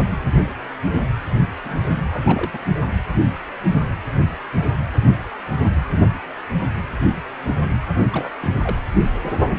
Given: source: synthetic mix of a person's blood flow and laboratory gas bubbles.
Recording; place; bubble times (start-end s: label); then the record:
Doppler ultrasound of blood flow; precordium
1.64-1.84 s: bubbles
1.93-2.59 s: bubbles
8.12-8.31 s: bubbles
8.42-8.46 s: bubbles
8.62-8.80 s: bubbles
From the record:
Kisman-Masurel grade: 222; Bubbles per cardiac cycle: several, 3 to 8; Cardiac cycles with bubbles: 10 to 50%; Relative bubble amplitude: moderate (0.250 to 0.450); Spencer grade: 2 (many but less than half of the cardiac periods contain bubble signals, singularly or in groups); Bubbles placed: only in the low amplitude regions of the cardiac cycle